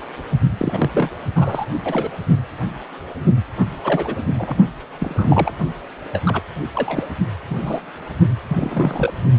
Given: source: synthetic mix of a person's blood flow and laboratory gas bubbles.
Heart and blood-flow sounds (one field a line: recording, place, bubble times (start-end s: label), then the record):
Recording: Doppler ultrasound of blood flow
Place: precordium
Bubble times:
0.57-0.90 s: bubbles
0.94-1.10 s: bubbles
1.35-1.66 s: bubbles
1.85-2.08 s: bubbles
3.58-3.79 s: bubbles
3.83-4.16 s: bubbles
4.38-4.56 s: bubbles
5.00-5.52 s: bubbles
6.12-6.22 s: bubbles
6.25-6.41 s: bubbles
6.75-7.06 s: bubbles
7.49-7.81 s: bubbles
8.48-9.12 s: bubbles
From the record:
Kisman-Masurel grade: 232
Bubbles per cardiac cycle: several, 3 to 8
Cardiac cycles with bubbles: 50 to 99%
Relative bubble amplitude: moderate (0.250 to 0.450)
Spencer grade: 3 (all of the cardiac periods contain showers or single bubble signals, but not dominating or overriding the cardiac motion signals)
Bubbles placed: only in the low amplitude regions of the cardiac cycle